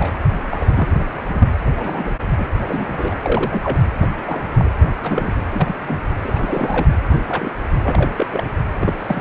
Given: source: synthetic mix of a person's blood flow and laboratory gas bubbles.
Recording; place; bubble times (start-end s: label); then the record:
Doppler ultrasound of blood flow; precordium
0.00-0.13 s: bubbles
0.50-0.94 s: bubbles
1.29-1.50 s: bubbles
1.78-2.12 s: bubbles
2.38-2.46 s: bubbles
2.58-3.15 s: bubbles
3.23-3.85 s: bubbles
4.02-4.08 s: bubbles
4.25-4.46 s: bubbles
4.58-4.70 s: bubbles
5.03-5.33 s: bubbles
5.51-5.75 s: bubbles
5.82-6.00 s: bubbles
6.24-6.88 s: bubbles
7.09-7.21 s: bubbles
7.28-7.51 s: bubbles
7.83-8.10 s: bubbles
8.13-8.27 s: bubbles
8.30-8.44 s: bubbles
8.75-9.21 s: bubbles
From the record:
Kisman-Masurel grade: 242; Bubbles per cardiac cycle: several, 3 to 8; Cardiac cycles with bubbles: 100%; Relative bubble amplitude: moderate (0.250 to 0.450); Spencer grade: 3 (all of the cardiac periods contain showers or single bubble signals, but not dominating or overriding the cardiac motion signals); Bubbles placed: anywhere in the cardiac cycle